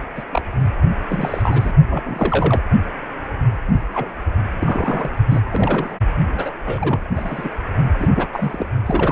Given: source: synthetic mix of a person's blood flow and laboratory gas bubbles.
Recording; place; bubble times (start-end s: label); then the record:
Doppler ultrasound of blood flow; precordium
0.00-0.03 s: bubbles
0.16-0.23 s: bubbles
0.32-0.42 s: bubbles
1.08-1.73 s: bubbles
1.90-2.61 s: bubbles
3.94-4.09 s: bubbles
4.59-5.12 s: bubbles
5.29-5.40 s: bubbles
5.50-5.97 s: bubbles
6.34-6.51 s: bubbles
6.65-7.08 s: bubbles
7.15-7.50 s: bubbles
7.98-8.27 s: bubbles
8.32-8.66 s: bubbles
8.86-9.12 s: bubbles
From the record:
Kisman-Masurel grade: 232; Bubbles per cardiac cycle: several, 3 to 8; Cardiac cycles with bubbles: 50 to 99%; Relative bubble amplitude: moderate (0.250 to 0.450); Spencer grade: 3 (all of the cardiac periods contain showers or single bubble signals, but not dominating or overriding the cardiac motion signals); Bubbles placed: only in the low amplitude regions of the cardiac cycle